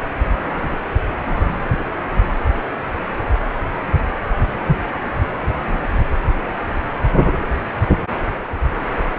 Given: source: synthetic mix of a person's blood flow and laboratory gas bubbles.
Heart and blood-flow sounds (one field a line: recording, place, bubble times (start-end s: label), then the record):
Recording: Doppler ultrasound of blood flow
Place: precordium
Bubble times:
no bubbles
From the record:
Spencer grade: 0 (complete lack of bubble signals)